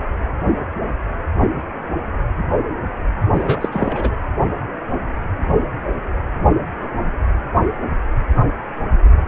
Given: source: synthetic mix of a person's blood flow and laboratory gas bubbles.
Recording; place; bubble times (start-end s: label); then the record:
Doppler ultrasound of blood flow; precordium
3.33-3.69 s: bubbles
3.72-4.13 s: bubbles
From the record:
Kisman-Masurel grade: 212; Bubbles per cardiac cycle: several, 3 to 8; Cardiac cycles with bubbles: 1 to 10%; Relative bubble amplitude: moderate (0.250 to 0.450); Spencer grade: 1 (occasional bubble signal discernible with the cardiac motion signal, with majority of cardiac periods free of bubbles); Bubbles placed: anywhere in the cardiac cycle